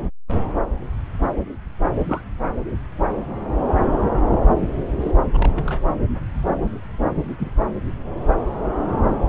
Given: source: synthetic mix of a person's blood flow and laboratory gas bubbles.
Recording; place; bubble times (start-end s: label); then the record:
Doppler ultrasound of blood flow; subclavian vein
2.04-2.21 s: bubbles
4.61-4.69 s: bubbles
5.00-5.11 s: bubbles
5.33-5.82 s: bubbles
7.38-7.50 s: bubbles
From the record:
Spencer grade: 2 (many but less than half of the cardiac periods contain bubble signals, singularly or in groups); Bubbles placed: anywhere in the cardiac cycle